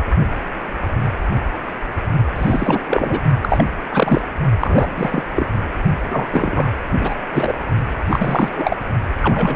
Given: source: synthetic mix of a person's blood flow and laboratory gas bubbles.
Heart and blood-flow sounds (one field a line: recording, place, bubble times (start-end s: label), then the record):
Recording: Doppler ultrasound of blood flow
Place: precordium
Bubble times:
2.36-2.83 s: bubbles
2.89-3.20 s: bubbles
3.42-3.65 s: bubbles
3.91-4.21 s: bubbles
4.59-5.22 s: bubbles
5.35-5.46 s: bubbles
6.09-6.29 s: bubbles
6.31-6.68 s: bubbles
7.00-7.15 s: bubbles
7.33-7.54 s: bubbles
8.10-8.77 s: bubbles
9.21-9.56 s: bubbles
From the record:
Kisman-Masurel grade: 333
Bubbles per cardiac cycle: rolling drumbeat, 9 or more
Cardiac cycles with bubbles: 50 to 99%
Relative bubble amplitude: loud (0.450 to 0.775)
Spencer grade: 3 (all of the cardiac periods contain showers or single bubble signals, but not dominating or overriding the cardiac motion signals)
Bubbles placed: only in the low amplitude regions of the cardiac cycle